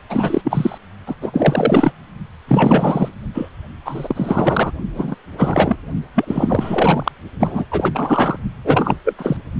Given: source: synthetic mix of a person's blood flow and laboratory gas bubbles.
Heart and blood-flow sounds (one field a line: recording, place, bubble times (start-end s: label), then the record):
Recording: Doppler ultrasound of blood flow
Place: precordium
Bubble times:
0.10-0.41 s: bubbles
0.44-0.78 s: bubbles
1.07-1.15 s: bubbles
1.21-1.92 s: bubbles
2.47-3.08 s: bubbles
3.34-3.48 s: bubbles
3.85-4.71 s: bubbles
4.95-5.16 s: bubbles
5.38-5.76 s: bubbles
6.16-7.12 s: bubbles
7.40-7.65 s: bubbles
7.71-8.39 s: bubbles
8.64-8.96 s: bubbles
9.04-9.13 s: bubbles
9.18-9.37 s: bubbles
From the record:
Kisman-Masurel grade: 343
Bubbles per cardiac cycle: rolling drumbeat, 9 or more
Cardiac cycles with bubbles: 100%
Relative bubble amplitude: loud (0.450 to 0.775)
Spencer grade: 3 (all of the cardiac periods contain showers or single bubble signals, but not dominating or overriding the cardiac motion signals)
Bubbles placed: only in the low amplitude regions of the cardiac cycle